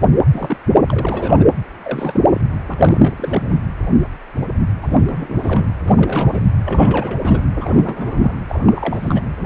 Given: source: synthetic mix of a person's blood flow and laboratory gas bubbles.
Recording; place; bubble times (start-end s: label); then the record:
Doppler ultrasound of blood flow; precordium
0.32-0.58 s: bubbles
0.67-0.81 s: bubbles
0.88-1.44 s: bubbles
1.82-2.41 s: bubbles
2.69-3.56 s: bubbles
4.82-5.02 s: bubbles
5.07-5.74 s: bubbles
5.85-6.45 s: bubbles
6.65-7.43 s: bubbles
7.61-8.36 s: bubbles
8.48-9.21 s: bubbles
9.37-9.46 s: bubbles
From the record:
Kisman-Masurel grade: 332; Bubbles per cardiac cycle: rolling drumbeat, 9 or more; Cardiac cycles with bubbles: 50 to 99%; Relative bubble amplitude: moderate (0.250 to 0.450); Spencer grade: 3 (all of the cardiac periods contain showers or single bubble signals, but not dominating or overriding the cardiac motion signals); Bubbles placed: anywhere in the cardiac cycle